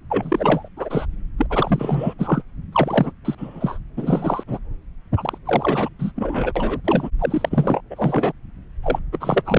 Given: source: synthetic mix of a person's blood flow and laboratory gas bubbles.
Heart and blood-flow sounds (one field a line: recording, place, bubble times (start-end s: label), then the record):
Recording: Doppler ultrasound of blood flow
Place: subclavian vein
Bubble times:
0.10-0.68 s: bubbles
0.77-1.05 s: bubbles
1.38-1.46 s: bubbles
1.49-2.14 s: bubbles
2.18-2.42 s: bubbles
2.72-3.12 s: bubbles
3.25-3.35 s: bubbles
3.38-3.79 s: bubbles
3.97-4.43 s: bubbles
4.47-4.59 s: bubbles
5.17-5.38 s: bubbles
5.45-5.88 s: bubbles
5.99-6.11 s: bubbles
6.15-6.52 s: bubbles
6.55-6.80 s: bubbles
6.84-7.09 s: bubbles
7.19-7.80 s: bubbles
7.90-8.32 s: bubbles
8.83-8.99 s: bubbles
9.12-9.42 s: bubbles
9.46-9.59 s: bubbles
From the record:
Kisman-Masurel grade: 342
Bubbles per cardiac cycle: rolling drumbeat, 9 or more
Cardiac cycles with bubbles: 100%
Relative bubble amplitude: moderate (0.250 to 0.450)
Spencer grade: 3 (all of the cardiac periods contain showers or single bubble signals, but not dominating or overriding the cardiac motion signals)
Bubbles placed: anywhere in the cardiac cycle